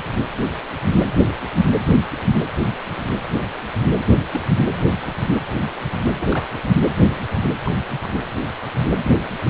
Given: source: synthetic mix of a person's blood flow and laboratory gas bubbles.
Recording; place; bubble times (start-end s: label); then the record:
Doppler ultrasound of blood flow; precordium
4.06-4.21 s: bubbles
4.33-4.41 s: bubbles
6.18-6.43 s: bubbles
7.65-7.72 s: bubbles
8.03-8.19 s: bubbles
9.03-9.17 s: bubbles
From the record:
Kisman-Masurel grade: 121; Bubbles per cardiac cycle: 1 to 2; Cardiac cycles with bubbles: 10 to 50%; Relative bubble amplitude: barely perceptible (0.100 to 0.250); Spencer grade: 2 (many but less than half of the cardiac periods contain bubble signals, singularly or in groups); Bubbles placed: anywhere in the cardiac cycle